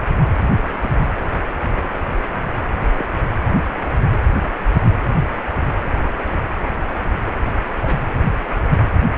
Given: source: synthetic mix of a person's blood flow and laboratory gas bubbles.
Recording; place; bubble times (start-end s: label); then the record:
Doppler ultrasound of blood flow; precordium
0.80-1.07 s: bubbles
2.98-3.06 s: bubbles
7.81-7.98 s: bubbles
From the record:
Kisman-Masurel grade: 121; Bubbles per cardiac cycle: 1 to 2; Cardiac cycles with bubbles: 10 to 50%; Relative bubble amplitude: barely perceptible (0.100 to 0.250); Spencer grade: 2 (many but less than half of the cardiac periods contain bubble signals, singularly or in groups); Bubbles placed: anywhere in the cardiac cycle